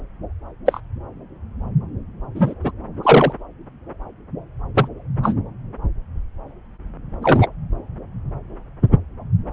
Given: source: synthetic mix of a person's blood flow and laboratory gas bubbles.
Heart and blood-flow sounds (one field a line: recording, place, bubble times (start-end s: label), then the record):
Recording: Doppler ultrasound of blood flow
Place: subclavian vein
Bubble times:
0.66-0.81 s: bubbles
2.34-2.54 s: bubbles
2.63-2.71 s: bubbles
3.03-3.33 s: bubbles
4.75-4.88 s: bubbles
5.22-5.33 s: bubbles
7.22-7.47 s: bubbles
From the record:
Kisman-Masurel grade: 123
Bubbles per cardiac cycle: 1 to 2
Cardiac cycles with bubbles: 10 to 50%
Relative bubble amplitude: loud (0.450 to 0.775)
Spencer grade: 2 (many but less than half of the cardiac periods contain bubble signals, singularly or in groups)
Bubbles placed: anywhere in the cardiac cycle